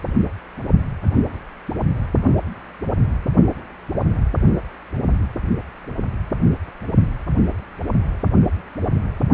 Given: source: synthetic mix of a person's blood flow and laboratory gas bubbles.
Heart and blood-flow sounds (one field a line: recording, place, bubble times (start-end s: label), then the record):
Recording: Doppler ultrasound of blood flow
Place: precordium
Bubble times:
0.06-0.18 s: bubbles
From the record:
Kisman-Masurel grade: 111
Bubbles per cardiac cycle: 1 to 2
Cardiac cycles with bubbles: 1 to 10%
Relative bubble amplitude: barely perceptible (0.100 to 0.250)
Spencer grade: 1 (occasional bubble signal discernible with the cardiac motion signal, with majority of cardiac periods free of bubbles)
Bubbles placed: only in the low amplitude regions of the cardiac cycle